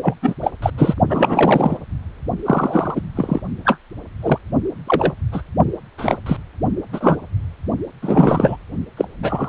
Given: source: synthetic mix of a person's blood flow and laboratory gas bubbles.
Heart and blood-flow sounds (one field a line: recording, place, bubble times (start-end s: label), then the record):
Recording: Doppler ultrasound of blood flow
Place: precordium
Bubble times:
0.02-0.15 s: bubbles
0.22-0.35 s: bubbles
0.42-0.52 s: bubbles
0.62-0.70 s: bubbles
0.77-0.94 s: bubbles
1.10-1.77 s: bubbles
2.44-3.01 s: bubbles
3.15-3.41 s: bubbles
3.65-3.77 s: bubbles
4.22-4.38 s: bubbles
4.87-5.12 s: bubbles
5.32-5.42 s: bubbles
5.98-6.17 s: bubbles
6.26-6.37 s: bubbles
6.92-7.17 s: bubbles
8.02-8.57 s: bubbles
8.97-9.05 s: bubbles
9.23-9.48 s: bubbles
From the record:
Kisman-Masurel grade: 243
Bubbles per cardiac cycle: several, 3 to 8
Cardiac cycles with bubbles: 100%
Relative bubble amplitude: loud (0.450 to 0.775)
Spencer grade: 3 (all of the cardiac periods contain showers or single bubble signals, but not dominating or overriding the cardiac motion signals)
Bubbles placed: only in the low amplitude regions of the cardiac cycle